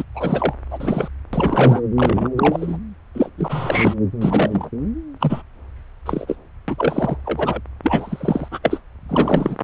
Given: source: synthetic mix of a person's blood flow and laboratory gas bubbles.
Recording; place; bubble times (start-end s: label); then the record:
Doppler ultrasound of blood flow; subclavian vein
0.00-0.03 s: bubbles
0.15-0.53 s: bubbles
0.71-1.08 s: bubbles
1.33-1.81 s: bubbles
1.96-2.29 s: bubbles
2.37-2.77 s: bubbles
3.14-3.29 s: bubbles
3.38-3.94 s: bubbles
4.21-4.70 s: bubbles
5.16-5.42 s: bubbles
6.05-6.35 s: bubbles
6.68-7.17 s: bubbles
7.25-7.60 s: bubbles
7.83-8.49 s: bubbles
8.52-8.59 s: bubbles
8.62-8.81 s: bubbles
9.09-9.56 s: bubbles
From the record:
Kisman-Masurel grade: 243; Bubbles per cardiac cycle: several, 3 to 8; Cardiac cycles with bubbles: 100%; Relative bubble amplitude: loud (0.450 to 0.775); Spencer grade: 3 (all of the cardiac periods contain showers or single bubble signals, but not dominating or overriding the cardiac motion signals); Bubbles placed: anywhere in the cardiac cycle